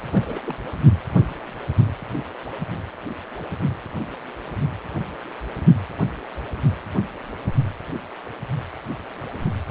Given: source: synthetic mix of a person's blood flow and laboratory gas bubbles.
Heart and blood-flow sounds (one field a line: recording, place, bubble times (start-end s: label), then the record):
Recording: Doppler ultrasound of blood flow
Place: precordium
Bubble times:
0.12-0.40 s: bubbles
0.47-0.55 s: bubbles
From the record:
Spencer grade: 1 (occasional bubble signal discernible with the cardiac motion signal, with majority of cardiac periods free of bubbles)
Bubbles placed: only in the low amplitude regions of the cardiac cycle